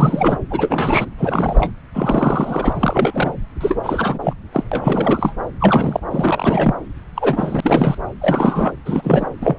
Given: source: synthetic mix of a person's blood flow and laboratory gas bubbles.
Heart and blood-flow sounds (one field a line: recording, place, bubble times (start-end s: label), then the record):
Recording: Doppler ultrasound of blood flow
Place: subclavian vein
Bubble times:
0.00-0.39 s: bubbles
0.50-1.05 s: bubbles
1.18-1.71 s: bubbles
1.93-3.33 s: bubbles
3.60-3.79 s: bubbles
3.83-4.19 s: bubbles
4.23-4.33 s: bubbles
4.52-4.64 s: bubbles
4.71-5.33 s: bubbles
5.60-6.00 s: bubbles
6.10-6.73 s: bubbles
7.15-7.98 s: bubbles
8.21-8.72 s: bubbles
8.85-9.26 s: bubbles
9.41-9.59 s: bubbles
From the record:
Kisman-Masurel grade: 342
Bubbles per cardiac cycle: rolling drumbeat, 9 or more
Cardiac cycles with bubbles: 100%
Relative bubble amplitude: moderate (0.250 to 0.450)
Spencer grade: 3 (all of the cardiac periods contain showers or single bubble signals, but not dominating or overriding the cardiac motion signals)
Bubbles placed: anywhere in the cardiac cycle